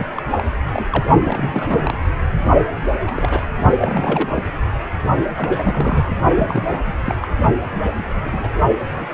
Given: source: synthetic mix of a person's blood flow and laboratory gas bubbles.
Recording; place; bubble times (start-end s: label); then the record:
Doppler ultrasound of blood flow; precordium
0.00-0.07 s: bubbles
0.16-0.22 s: bubbles
0.36-0.45 s: bubbles
0.72-0.86 s: bubbles
0.90-1.06 s: bubbles
1.23-1.98 s: bubbles
2.88-2.92 s: bubbles
3.06-3.43 s: bubbles
3.80-4.43 s: bubbles
5.37-6.06 s: bubbles
6.35-6.63 s: bubbles
6.72-6.80 s: bubbles
6.86-6.92 s: bubbles
7.02-7.15 s: bubbles
7.20-7.27 s: bubbles
7.59-7.66 s: bubbles
7.97-8.21 s: bubbles
8.24-8.49 s: bubbles
8.95-9.13 s: bubbles
From the record:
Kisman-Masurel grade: 242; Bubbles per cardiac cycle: several, 3 to 8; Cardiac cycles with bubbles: 100%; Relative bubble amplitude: moderate (0.250 to 0.450); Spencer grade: 3 (all of the cardiac periods contain showers or single bubble signals, but not dominating or overriding the cardiac motion signals); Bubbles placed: only in the low amplitude regions of the cardiac cycle